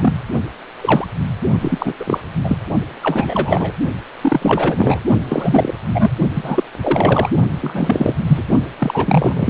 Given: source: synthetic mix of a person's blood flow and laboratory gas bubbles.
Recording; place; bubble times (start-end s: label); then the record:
Doppler ultrasound of blood flow; precordium
0.00-0.14 s: bubbles
0.81-1.07 s: bubbles
1.60-1.93 s: bubbles
1.99-2.20 s: bubbles
2.44-2.56 s: bubbles
3.02-3.73 s: bubbles
4.21-5.03 s: bubbles
5.28-5.75 s: bubbles
5.93-6.13 s: bubbles
6.34-6.63 s: bubbles
6.82-7.29 s: bubbles
7.60-8.16 s: bubbles
8.27-8.43 s: bubbles
8.79-9.50 s: bubbles
From the record:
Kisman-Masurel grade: 343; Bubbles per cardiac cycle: rolling drumbeat, 9 or more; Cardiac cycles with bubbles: 100%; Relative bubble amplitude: loud (0.450 to 0.775); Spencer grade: 3 (all of the cardiac periods contain showers or single bubble signals, but not dominating or overriding the cardiac motion signals); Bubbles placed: only in the low amplitude regions of the cardiac cycle